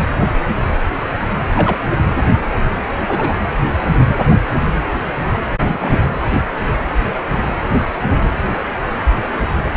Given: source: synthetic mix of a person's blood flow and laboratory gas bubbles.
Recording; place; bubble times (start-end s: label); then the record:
Doppler ultrasound of blood flow; precordium
1.55-1.76 s: bubbles
3.07-3.34 s: bubbles
4.29-4.36 s: bubbles
5.66-5.97 s: bubbles
From the record:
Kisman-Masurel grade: 122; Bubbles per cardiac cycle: 1 to 2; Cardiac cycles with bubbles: 10 to 50%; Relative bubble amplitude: moderate (0.250 to 0.450); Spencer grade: 2 (many but less than half of the cardiac periods contain bubble signals, singularly or in groups); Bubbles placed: anywhere in the cardiac cycle